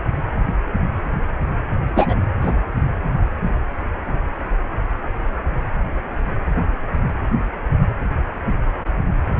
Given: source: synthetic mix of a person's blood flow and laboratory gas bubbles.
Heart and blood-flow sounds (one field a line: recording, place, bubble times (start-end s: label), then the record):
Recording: Doppler ultrasound of blood flow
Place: precordium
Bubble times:
1.95-2.15 s: bubbles
2.41-2.52 s: bubbles
From the record:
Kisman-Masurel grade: 213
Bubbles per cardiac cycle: several, 3 to 8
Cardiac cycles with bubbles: 1 to 10%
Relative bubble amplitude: loud (0.450 to 0.775)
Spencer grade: 1 (occasional bubble signal discernible with the cardiac motion signal, with majority of cardiac periods free of bubbles)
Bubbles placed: only in the low amplitude regions of the cardiac cycle